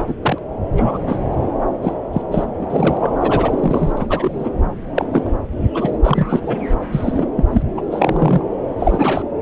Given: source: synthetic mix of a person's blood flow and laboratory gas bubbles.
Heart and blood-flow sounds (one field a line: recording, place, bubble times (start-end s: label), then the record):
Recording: Doppler ultrasound of blood flow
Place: subclavian vein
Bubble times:
0.00-0.15 s: bubbles
0.22-0.39 s: bubbles
0.76-1.01 s: bubbles
1.07-1.19 s: bubbles
1.82-1.94 s: bubbles
2.12-2.21 s: bubbles
2.31-2.46 s: bubbles
2.61-2.67 s: bubbles
2.69-3.13 s: bubbles
3.20-3.92 s: bubbles
3.97-4.50 s: bubbles
4.94-5.30 s: bubbles
5.75-5.91 s: bubbles
6.04-6.40 s: bubbles
6.43-6.55 s: bubbles
6.92-7.29 s: bubbles
7.36-7.45 s: bubbles
7.52-7.62 s: bubbles
7.77-7.81 s: bubbles
7.90-8.41 s: bubbles
8.77-9.22 s: bubbles
From the record:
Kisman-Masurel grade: 243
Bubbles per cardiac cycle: several, 3 to 8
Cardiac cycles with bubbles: 100%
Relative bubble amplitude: loud (0.450 to 0.775)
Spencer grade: 3 (all of the cardiac periods contain showers or single bubble signals, but not dominating or overriding the cardiac motion signals)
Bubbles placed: anywhere in the cardiac cycle